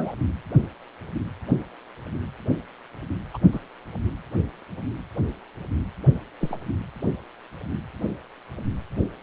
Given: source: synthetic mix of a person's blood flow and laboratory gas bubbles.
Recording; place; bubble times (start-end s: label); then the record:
Doppler ultrasound of blood flow; precordium
0.00-0.13 s: bubbles
3.33-3.38 s: bubbles
3.51-3.60 s: bubbles
6.40-6.56 s: bubbles
From the record:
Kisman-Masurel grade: 121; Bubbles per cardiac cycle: 1 to 2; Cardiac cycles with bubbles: 10 to 50%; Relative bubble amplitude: barely perceptible (0.100 to 0.250); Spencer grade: 2 (many but less than half of the cardiac periods contain bubble signals, singularly or in groups); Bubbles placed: anywhere in the cardiac cycle